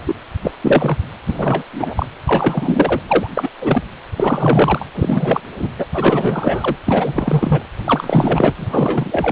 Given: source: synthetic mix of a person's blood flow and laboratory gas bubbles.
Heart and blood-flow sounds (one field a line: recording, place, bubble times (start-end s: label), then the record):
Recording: Doppler ultrasound of blood flow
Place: precordium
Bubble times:
0.07-0.16 s: bubbles
0.43-0.51 s: bubbles
0.61-0.98 s: bubbles
1.26-1.66 s: bubbles
1.73-2.06 s: bubbles
2.26-3.00 s: bubbles
3.08-3.27 s: bubbles
3.34-3.50 s: bubbles
3.61-3.83 s: bubbles
4.16-4.86 s: bubbles
4.94-5.41 s: bubbles
5.55-5.71 s: bubbles
5.78-5.86 s: bubbles
5.94-6.76 s: bubbles
6.86-7.66 s: bubbles
7.85-8.52 s: bubbles
8.56-9.32 s: bubbles
From the record:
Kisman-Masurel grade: 343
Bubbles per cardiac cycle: rolling drumbeat, 9 or more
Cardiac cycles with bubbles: 100%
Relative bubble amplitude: loud (0.450 to 0.775)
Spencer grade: 3 (all of the cardiac periods contain showers or single bubble signals, but not dominating or overriding the cardiac motion signals)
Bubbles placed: anywhere in the cardiac cycle